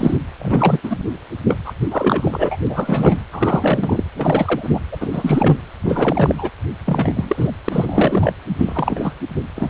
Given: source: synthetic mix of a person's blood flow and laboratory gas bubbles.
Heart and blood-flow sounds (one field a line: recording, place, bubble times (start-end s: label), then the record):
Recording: Doppler ultrasound of blood flow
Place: precordium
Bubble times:
0.00-0.17 s: bubbles
0.38-0.79 s: bubbles
0.83-0.97 s: bubbles
1.47-1.58 s: bubbles
1.65-1.73 s: bubbles
1.91-2.56 s: bubbles
2.67-3.23 s: bubbles
3.32-4.04 s: bubbles
4.16-4.79 s: bubbles
4.92-4.97 s: bubbles
5.00-5.09 s: bubbles
5.12-5.58 s: bubbles
5.83-6.35 s: bubbles
6.38-6.50 s: bubbles
6.85-7.53 s: bubbles
7.65-7.69 s: bubbles
7.71-8.33 s: bubbles
8.48-9.14 s: bubbles
9.55-9.70 s: bubbles
From the record:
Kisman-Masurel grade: 343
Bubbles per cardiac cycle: rolling drumbeat, 9 or more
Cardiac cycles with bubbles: 100%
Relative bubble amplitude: loud (0.450 to 0.775)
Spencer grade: 3 (all of the cardiac periods contain showers or single bubble signals, but not dominating or overriding the cardiac motion signals)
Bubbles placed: anywhere in the cardiac cycle